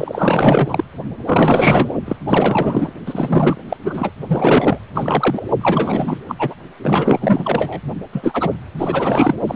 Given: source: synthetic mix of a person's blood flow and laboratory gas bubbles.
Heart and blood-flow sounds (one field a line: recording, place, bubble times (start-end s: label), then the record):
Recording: Doppler ultrasound of blood flow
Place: precordium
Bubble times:
0.00-0.84 s: bubbles
1.23-1.94 s: bubbles
2.05-2.17 s: bubbles
2.25-2.93 s: bubbles
3.06-3.62 s: bubbles
3.69-3.77 s: bubbles
3.82-4.10 s: bubbles
4.27-4.79 s: bubbles
4.95-5.47 s: bubbles
5.61-6.19 s: bubbles
6.29-6.35 s: bubbles
6.38-6.54 s: bubbles
6.79-7.81 s: bubbles
8.12-8.50 s: bubbles
8.78-9.34 s: bubbles
9.47-9.56 s: bubbles
From the record:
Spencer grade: 4 (maximum detectable bubble signal sounding continuously throughout systole and diastole of every cardiac period, and overriding the amplitude of the normal cardiac signals)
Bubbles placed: only in the low amplitude regions of the cardiac cycle